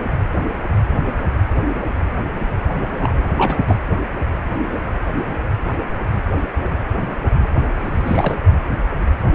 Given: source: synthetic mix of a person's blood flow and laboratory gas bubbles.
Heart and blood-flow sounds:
Doppler ultrasound of blood flow; precordium
2.97-3.24 s: bubbles
3.37-3.84 s: bubbles
7.83-8.39 s: bubbles
From the record:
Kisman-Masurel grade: 222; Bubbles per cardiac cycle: several, 3 to 8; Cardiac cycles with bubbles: 10 to 50%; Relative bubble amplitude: moderate (0.250 to 0.450); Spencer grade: 2 (many but less than half of the cardiac periods contain bubble signals, singularly or in groups); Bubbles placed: only in the low amplitude regions of the cardiac cycle

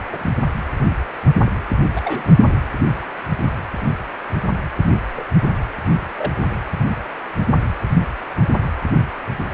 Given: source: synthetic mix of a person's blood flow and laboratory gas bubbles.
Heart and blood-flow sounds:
Doppler ultrasound of blood flow; precordium
0.07-0.30 s: bubbles
1.95-2.24 s: bubbles
5.15-5.25 s: bubbles
6.17-6.32 s: bubbles
From the record:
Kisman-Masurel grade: 121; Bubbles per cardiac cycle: 1 to 2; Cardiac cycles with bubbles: 10 to 50%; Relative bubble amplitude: barely perceptible (0.100 to 0.250); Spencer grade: 2 (many but less than half of the cardiac periods contain bubble signals, singularly or in groups); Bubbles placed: anywhere in the cardiac cycle

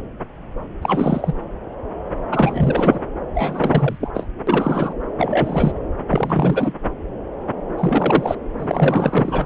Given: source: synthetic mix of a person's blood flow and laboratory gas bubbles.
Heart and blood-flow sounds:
Doppler ultrasound of blood flow; subclavian vein
0.81-1.34 s: bubbles
2.31-3.00 s: bubbles
3.35-4.10 s: bubbles
4.14-4.26 s: bubbles
4.47-4.93 s: bubbles
5.18-5.72 s: bubbles
6.09-6.74 s: bubbles
7.77-8.37 s: bubbles
8.59-9.46 s: bubbles
From the record:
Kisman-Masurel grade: 333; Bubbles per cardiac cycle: rolling drumbeat, 9 or more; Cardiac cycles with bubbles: 50 to 99%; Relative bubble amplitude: loud (0.450 to 0.775); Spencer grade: 3 (all of the cardiac periods contain showers or single bubble signals, but not dominating or overriding the cardiac motion signals); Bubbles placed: anywhere in the cardiac cycle

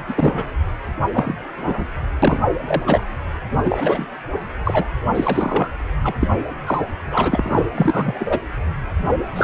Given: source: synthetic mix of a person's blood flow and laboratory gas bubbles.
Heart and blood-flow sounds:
Doppler ultrasound of blood flow; precordium
0.07-0.49 s: bubbles
1.12-1.35 s: bubbles
1.56-1.85 s: bubbles
2.22-2.40 s: bubbles
2.67-2.83 s: bubbles
2.86-3.01 s: bubbles
3.64-4.07 s: bubbles
4.64-4.85 s: bubbles
5.14-5.67 s: bubbles
6.03-6.14 s: bubbles
6.20-6.28 s: bubbles
6.66-6.82 s: bubbles
7.10-7.66 s: bubbles
7.75-8.39 s: bubbles
9.36-9.44 s: bubbles
From the record:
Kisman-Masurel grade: 233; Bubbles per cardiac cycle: several, 3 to 8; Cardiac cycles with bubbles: 50 to 99%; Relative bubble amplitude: loud (0.450 to 0.775); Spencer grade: 3 (all of the cardiac periods contain showers or single bubble signals, but not dominating or overriding the cardiac motion signals); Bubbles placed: anywhere in the cardiac cycle

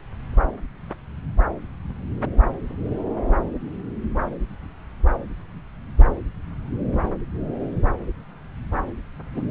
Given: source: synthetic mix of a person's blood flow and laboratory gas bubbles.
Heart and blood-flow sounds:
Doppler ultrasound of blood flow; subclavian vein
9.34-9.41 s: bubbles
From the record:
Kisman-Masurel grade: 112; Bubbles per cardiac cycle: 1 to 2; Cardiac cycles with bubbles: 1 to 10%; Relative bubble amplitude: moderate (0.250 to 0.450); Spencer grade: 1 (occasional bubble signal discernible with the cardiac motion signal, with majority of cardiac periods free of bubbles); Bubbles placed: anywhere in the cardiac cycle

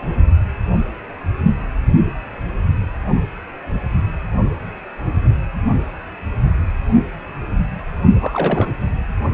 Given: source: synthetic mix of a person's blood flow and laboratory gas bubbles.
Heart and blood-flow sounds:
Doppler ultrasound of blood flow; precordium
8.20-8.72 s: bubbles
From the record:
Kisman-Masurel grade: 212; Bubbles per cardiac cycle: several, 3 to 8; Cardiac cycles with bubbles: 1 to 10%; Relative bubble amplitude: moderate (0.250 to 0.450); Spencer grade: 1 (occasional bubble signal discernible with the cardiac motion signal, with majority of cardiac periods free of bubbles); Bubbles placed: anywhere in the cardiac cycle

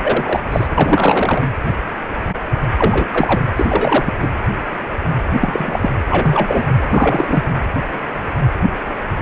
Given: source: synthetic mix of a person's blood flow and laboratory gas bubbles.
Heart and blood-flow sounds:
Doppler ultrasound of blood flow; precordium
0.02-0.40 s: bubbles
0.52-0.67 s: bubbles
0.78-1.42 s: bubbles
2.78-3.07 s: bubbles
3.11-3.42 s: bubbles
3.56-4.12 s: bubbles
4.22-4.28 s: bubbles
5.41-5.91 s: bubbles
6.10-6.67 s: bubbles
6.90-7.43 s: bubbles
From the record:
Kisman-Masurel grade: 233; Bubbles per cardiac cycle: several, 3 to 8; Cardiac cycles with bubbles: 50 to 99%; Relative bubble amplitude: loud (0.450 to 0.775); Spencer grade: 3 (all of the cardiac periods contain showers or single bubble signals, but not dominating or overriding the cardiac motion signals); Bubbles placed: anywhere in the cardiac cycle

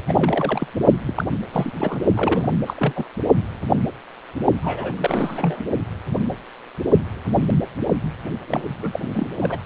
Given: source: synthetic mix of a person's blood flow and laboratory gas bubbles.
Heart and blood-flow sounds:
Doppler ultrasound of blood flow; precordium
0.08-0.68 s: bubbles
1.05-1.25 s: bubbles
1.52-1.72 s: bubbles
1.74-2.04 s: bubbles
2.14-2.53 s: bubbles
2.66-2.74 s: bubbles
2.78-2.93 s: bubbles
2.96-3.06 s: bubbles
4.62-5.64 s: bubbles
8.47-8.64 s: bubbles
8.82-8.99 s: bubbles
9.02-9.08 s: bubbles
9.14-9.28 s: bubbles
9.39-9.62 s: bubbles
From the record:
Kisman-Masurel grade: 332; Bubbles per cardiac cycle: rolling drumbeat, 9 or more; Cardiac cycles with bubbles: 50 to 99%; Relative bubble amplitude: moderate (0.250 to 0.450); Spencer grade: 3 (all of the cardiac periods contain showers or single bubble signals, but not dominating or overriding the cardiac motion signals); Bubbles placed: only in the low amplitude regions of the cardiac cycle

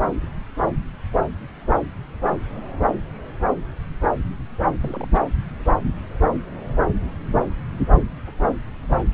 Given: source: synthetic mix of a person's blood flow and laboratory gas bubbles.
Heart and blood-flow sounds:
Doppler ultrasound of blood flow; subclavian vein
4.79-5.07 s: bubbles
5.12-5.24 s: bubbles
From the record:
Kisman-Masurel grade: 211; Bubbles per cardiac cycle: several, 3 to 8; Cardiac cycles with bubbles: 1 to 10%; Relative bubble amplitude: barely perceptible (0.100 to 0.250); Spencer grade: 1 (occasional bubble signal discernible with the cardiac motion signal, with majority of cardiac periods free of bubbles); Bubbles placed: anywhere in the cardiac cycle

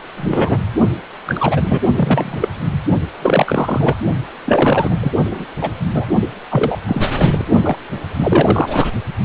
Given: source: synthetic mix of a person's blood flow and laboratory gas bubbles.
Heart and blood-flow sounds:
Doppler ultrasound of blood flow; precordium
0.16-0.58 s: bubbles
1.26-1.80 s: bubbles
1.95-2.49 s: bubbles
3.21-3.98 s: bubbles
4.45-5.12 s: bubbles
5.31-5.45 s: bubbles
5.61-5.71 s: bubbles
5.94-6.05 s: bubbles
6.21-6.29 s: bubbles
6.51-6.79 s: bubbles
6.86-7.02 s: bubbles
7.17-7.45 s: bubbles
7.63-7.77 s: bubbles
8.13-8.86 s: bubbles
From the record:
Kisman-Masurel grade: 243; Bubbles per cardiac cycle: several, 3 to 8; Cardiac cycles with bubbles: 100%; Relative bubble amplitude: loud (0.450 to 0.775); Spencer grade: 3 (all of the cardiac periods contain showers or single bubble signals, but not dominating or overriding the cardiac motion signals); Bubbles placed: only in the low amplitude regions of the cardiac cycle

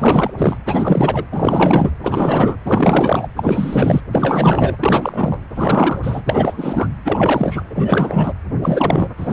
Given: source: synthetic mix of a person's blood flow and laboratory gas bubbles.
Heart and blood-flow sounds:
Doppler ultrasound of blood flow; precordium
0.00-0.30 s: bubbles
0.37-0.57 s: bubbles
0.66-1.26 s: bubbles
1.31-1.91 s: bubbles
2.03-2.58 s: bubbles
2.66-3.28 s: bubbles
3.36-4.01 s: bubbles
4.11-4.76 s: bubbles
4.79-5.38 s: bubbles
5.55-6.00 s: bubbles
6.03-6.22 s: bubbles
6.26-6.88 s: bubbles
7.04-7.61 s: bubbles
7.75-8.33 s: bubbles
8.62-9.08 s: bubbles
9.17-9.32 s: bubbles
From the record:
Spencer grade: 4 (maximum detectable bubble signal sounding continuously throughout systole and diastole of every cardiac period, and overriding the amplitude of the normal cardiac signals); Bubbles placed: anywhere in the cardiac cycle

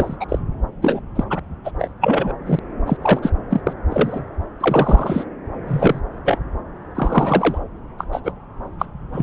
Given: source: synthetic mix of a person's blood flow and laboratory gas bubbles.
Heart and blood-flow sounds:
Doppler ultrasound of blood flow; subclavian vein
0.00-0.16 s: bubbles
0.20-0.25 s: bubbles
0.28-0.38 s: bubbles
0.81-1.00 s: bubbles
1.16-1.24 s: bubbles
1.30-1.40 s: bubbles
1.65-1.71 s: bubbles
1.79-1.91 s: bubbles
2.00-2.35 s: bubbles
2.46-2.59 s: bubbles
2.86-2.97 s: bubbles
3.02-3.19 s: bubbles
3.22-3.31 s: bubbles
3.50-3.61 s: bubbles
3.67-3.73 s: bubbles
3.90-4.25 s: bubbles
4.60-5.25 s: bubbles
5.67-6.00 s: bubbles
6.25-6.38 s: bubbles
6.95-7.58 s: bubbles
7.99-8.05 s: bubbles
8.12-8.21 s: bubbles
8.23-8.32 s: bubbles
8.79-8.85 s: bubbles
9.12-9.23 s: bubbles
From the record:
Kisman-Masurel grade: 243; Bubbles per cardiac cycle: several, 3 to 8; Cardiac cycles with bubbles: 100%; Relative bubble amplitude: loud (0.450 to 0.775); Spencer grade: 3 (all of the cardiac periods contain showers or single bubble signals, but not dominating or overriding the cardiac motion signals); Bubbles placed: anywhere in the cardiac cycle

